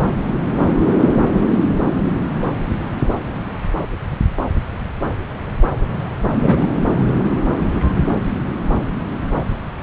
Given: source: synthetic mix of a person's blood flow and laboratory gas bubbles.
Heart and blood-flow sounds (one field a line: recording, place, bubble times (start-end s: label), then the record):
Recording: Doppler ultrasound of blood flow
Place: subclavian vein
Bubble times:
6.42-6.67 s: bubbles
From the record:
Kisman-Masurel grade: 113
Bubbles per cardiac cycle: 1 to 2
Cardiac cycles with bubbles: 1 to 10%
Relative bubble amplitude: loud (0.450 to 0.775)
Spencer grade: 1 (occasional bubble signal discernible with the cardiac motion signal, with majority of cardiac periods free of bubbles)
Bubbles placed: anywhere in the cardiac cycle